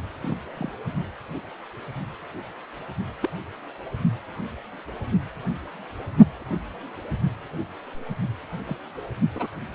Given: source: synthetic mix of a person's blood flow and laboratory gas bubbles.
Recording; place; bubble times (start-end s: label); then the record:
Doppler ultrasound of blood flow; precordium
0.21-0.36 s: bubbles
0.57-0.72 s: bubbles
3.21-3.30 s: bubbles
8.67-8.77 s: bubbles
9.35-9.46 s: bubbles
From the record:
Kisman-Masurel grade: 121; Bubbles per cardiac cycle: 1 to 2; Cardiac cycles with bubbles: 10 to 50%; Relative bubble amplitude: barely perceptible (0.100 to 0.250); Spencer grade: 2 (many but less than half of the cardiac periods contain bubble signals, singularly or in groups); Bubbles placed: only in the low amplitude regions of the cardiac cycle